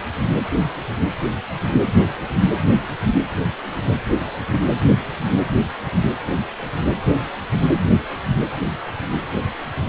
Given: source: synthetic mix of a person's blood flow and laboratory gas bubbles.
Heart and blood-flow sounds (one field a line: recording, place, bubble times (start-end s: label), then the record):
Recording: Doppler ultrasound of blood flow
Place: precordium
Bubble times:
no bubbles
From the record:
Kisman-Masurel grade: 000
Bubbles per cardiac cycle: 0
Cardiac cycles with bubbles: 0%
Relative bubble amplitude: no bubbles discernible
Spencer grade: 0 (complete lack of bubble signals)